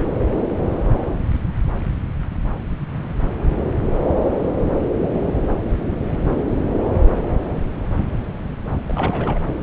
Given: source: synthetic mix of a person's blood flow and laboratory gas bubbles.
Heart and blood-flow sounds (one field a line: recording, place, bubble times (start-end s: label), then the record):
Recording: Doppler ultrasound of blood flow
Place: subclavian vein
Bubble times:
8.89-9.40 s: bubbles
From the record:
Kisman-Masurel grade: 211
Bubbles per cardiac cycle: several, 3 to 8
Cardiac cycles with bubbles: 1 to 10%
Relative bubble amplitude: barely perceptible (0.100 to 0.250)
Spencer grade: 1 (occasional bubble signal discernible with the cardiac motion signal, with majority of cardiac periods free of bubbles)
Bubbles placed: anywhere in the cardiac cycle